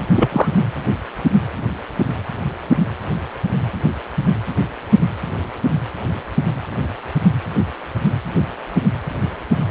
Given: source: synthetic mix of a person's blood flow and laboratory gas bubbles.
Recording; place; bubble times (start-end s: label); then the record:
Doppler ultrasound of blood flow; precordium
0.15-0.49 s: bubbles
From the record:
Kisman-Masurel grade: 113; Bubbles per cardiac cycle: 1 to 2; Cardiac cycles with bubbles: 1 to 10%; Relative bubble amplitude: loud (0.450 to 0.775); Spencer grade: 1 (occasional bubble signal discernible with the cardiac motion signal, with majority of cardiac periods free of bubbles); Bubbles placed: anywhere in the cardiac cycle